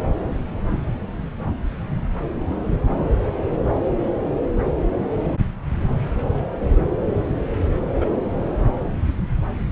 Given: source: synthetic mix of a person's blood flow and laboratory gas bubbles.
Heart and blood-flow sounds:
Doppler ultrasound of blood flow; subclavian vein
8.00-8.10 s: bubbles
From the record:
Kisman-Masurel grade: 112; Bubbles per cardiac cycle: 1 to 2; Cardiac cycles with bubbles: 1 to 10%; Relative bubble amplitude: moderate (0.250 to 0.450); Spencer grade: 1 (occasional bubble signal discernible with the cardiac motion signal, with majority of cardiac periods free of bubbles); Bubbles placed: anywhere in the cardiac cycle

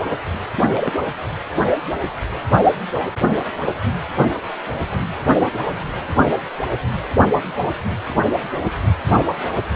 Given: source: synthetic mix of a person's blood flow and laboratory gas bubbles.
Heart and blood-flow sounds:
Doppler ultrasound of blood flow; precordium
0.53-0.93 s: bubbles
1.58-1.63 s: bubbles
From the record:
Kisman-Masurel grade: 211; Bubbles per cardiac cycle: several, 3 to 8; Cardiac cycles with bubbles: 1 to 10%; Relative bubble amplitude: barely perceptible (0.100 to 0.250); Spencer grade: 1 (occasional bubble signal discernible with the cardiac motion signal, with majority of cardiac periods free of bubbles); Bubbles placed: anywhere in the cardiac cycle

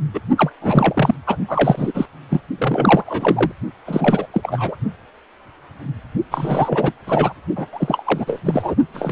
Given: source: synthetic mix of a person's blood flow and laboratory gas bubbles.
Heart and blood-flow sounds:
Doppler ultrasound of blood flow; precordium
0.14-0.20 s: bubbles
0.37-0.52 s: bubbles
0.61-1.15 s: bubbles
1.27-1.38 s: bubbles
1.48-2.05 s: bubbles
2.29-2.42 s: bubbles
2.58-3.51 s: bubbles
3.85-4.27 s: bubbles
4.33-4.76 s: bubbles
6.31-6.93 s: bubbles
7.07-7.33 s: bubbles
7.56-7.67 s: bubbles
7.73-8.40 s: bubbles
8.45-8.75 s: bubbles
8.93-9.12 s: bubbles
From the record:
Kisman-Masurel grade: 333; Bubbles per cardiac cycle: rolling drumbeat, 9 or more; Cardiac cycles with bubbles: 50 to 99%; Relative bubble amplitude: loud (0.450 to 0.775); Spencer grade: 3 (all of the cardiac periods contain showers or single bubble signals, but not dominating or overriding the cardiac motion signals); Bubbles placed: only in the low amplitude regions of the cardiac cycle

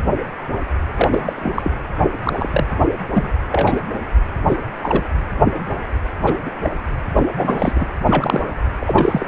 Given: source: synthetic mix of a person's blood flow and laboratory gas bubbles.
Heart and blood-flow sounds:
Doppler ultrasound of blood flow; precordium
0.96-1.08 s: bubbles
1.11-1.33 s: bubbles
1.36-1.71 s: bubbles
2.24-2.48 s: bubbles
2.52-2.66 s: bubbles
3.11-3.29 s: bubbles
3.52-3.81 s: bubbles
3.89-3.93 s: bubbles
4.47-4.58 s: bubbles
4.83-5.04 s: bubbles
6.21-6.50 s: bubbles
6.62-6.70 s: bubbles
7.16-7.23 s: bubbles
7.38-7.87 s: bubbles
8.07-8.42 s: bubbles
8.80-9.26 s: bubbles
From the record:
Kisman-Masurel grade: 233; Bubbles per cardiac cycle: several, 3 to 8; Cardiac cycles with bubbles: 50 to 99%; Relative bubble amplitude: loud (0.450 to 0.775); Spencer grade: 3 (all of the cardiac periods contain showers or single bubble signals, but not dominating or overriding the cardiac motion signals); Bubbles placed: anywhere in the cardiac cycle

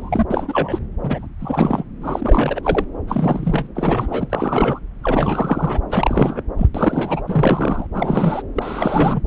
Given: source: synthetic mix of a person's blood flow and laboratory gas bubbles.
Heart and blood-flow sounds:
Doppler ultrasound of blood flow; subclavian vein
0.00-0.25 s: bubbles
0.30-0.79 s: bubbles
1.03-1.28 s: bubbles
1.40-1.84 s: bubbles
2.01-2.85 s: bubbles
3.08-3.67 s: bubbles
3.75-4.79 s: bubbles
5.04-5.80 s: bubbles
5.90-6.42 s: bubbles
6.58-6.67 s: bubbles
6.75-7.22 s: bubbles
7.26-7.86 s: bubbles
7.93-8.42 s: bubbles
8.56-9.20 s: bubbles
From the record:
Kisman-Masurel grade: 343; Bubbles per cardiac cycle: rolling drumbeat, 9 or more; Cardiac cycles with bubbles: 100%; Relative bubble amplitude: loud (0.450 to 0.775); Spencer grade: 3 (all of the cardiac periods contain showers or single bubble signals, but not dominating or overriding the cardiac motion signals); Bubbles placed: anywhere in the cardiac cycle

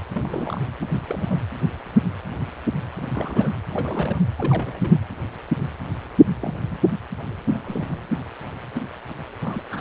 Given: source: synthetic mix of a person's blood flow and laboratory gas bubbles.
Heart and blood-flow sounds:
Doppler ultrasound of blood flow; precordium
0.10-0.61 s: bubbles
0.81-0.86 s: bubbles
1.08-1.42 s: bubbles
2.95-3.10 s: bubbles
3.14-3.58 s: bubbles
3.71-4.23 s: bubbles
4.38-4.99 s: bubbles
6.42-6.54 s: bubbles
6.71-6.77 s: bubbles
7.49-7.99 s: bubbles
9.40-9.63 s: bubbles
9.71-9.81 s: bubbles
From the record:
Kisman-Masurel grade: 221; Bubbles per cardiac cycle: several, 3 to 8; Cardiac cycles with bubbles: 10 to 50%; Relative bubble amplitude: barely perceptible (0.100 to 0.250); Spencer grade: 2 (many but less than half of the cardiac periods contain bubble signals, singularly or in groups); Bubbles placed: anywhere in the cardiac cycle

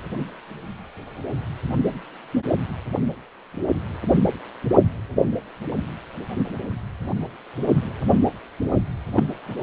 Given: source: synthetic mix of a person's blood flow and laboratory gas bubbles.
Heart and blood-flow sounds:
Doppler ultrasound of blood flow; precordium
9.15-9.23 s: bubbles
From the record:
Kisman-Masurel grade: 112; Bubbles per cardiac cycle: 1 to 2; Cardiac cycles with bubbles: 1 to 10%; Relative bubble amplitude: moderate (0.250 to 0.450); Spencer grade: 1 (occasional bubble signal discernible with the cardiac motion signal, with majority of cardiac periods free of bubbles); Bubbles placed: anywhere in the cardiac cycle

